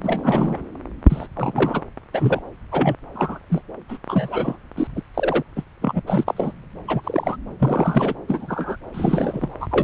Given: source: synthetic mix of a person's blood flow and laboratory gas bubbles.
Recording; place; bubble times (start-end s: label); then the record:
Doppler ultrasound of blood flow; subclavian vein
0.03-0.57 s: bubbles
1.09-1.27 s: bubbles
1.36-1.81 s: bubbles
2.13-2.40 s: bubbles
2.71-2.96 s: bubbles
3.15-3.40 s: bubbles
3.50-3.61 s: bubbles
3.88-3.97 s: bubbles
4.08-4.56 s: bubbles
4.77-4.87 s: bubbles
4.96-5.01 s: bubbles
5.14-5.42 s: bubbles
5.56-5.63 s: bubbles
5.81-6.01 s: bubbles
6.06-6.24 s: bubbles
6.26-6.52 s: bubbles
6.88-7.36 s: bubbles
7.59-8.14 s: bubbles
8.28-8.76 s: bubbles
8.93-9.51 s: bubbles
9.60-9.84 s: bubbles
From the record:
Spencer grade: 3 (all of the cardiac periods contain showers or single bubble signals, but not dominating or overriding the cardiac motion signals); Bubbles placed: anywhere in the cardiac cycle